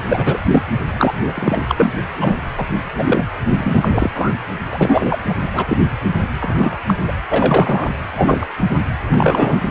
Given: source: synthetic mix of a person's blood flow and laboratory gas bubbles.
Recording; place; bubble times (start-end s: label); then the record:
Doppler ultrasound of blood flow; precordium
0.08-0.39 s: bubbles
0.51-0.65 s: bubbles
0.99-1.32 s: bubbles
1.35-1.92 s: bubbles
2.21-2.37 s: bubbles
2.58-2.65 s: bubbles
2.96-3.25 s: bubbles
3.54-4.10 s: bubbles
4.14-4.32 s: bubbles
4.73-5.17 s: bubbles
5.28-5.35 s: bubbles
5.53-5.77 s: bubbles
6.40-6.78 s: bubbles
6.86-6.94 s: bubbles
7.07-7.13 s: bubbles
7.29-7.91 s: bubbles
8.16-8.46 s: bubbles
8.74-8.81 s: bubbles
9.08-9.62 s: bubbles
From the record:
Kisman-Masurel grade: 243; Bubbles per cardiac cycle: several, 3 to 8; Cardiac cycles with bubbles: 100%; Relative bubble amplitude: loud (0.450 to 0.775); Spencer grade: 3 (all of the cardiac periods contain showers or single bubble signals, but not dominating or overriding the cardiac motion signals); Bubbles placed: anywhere in the cardiac cycle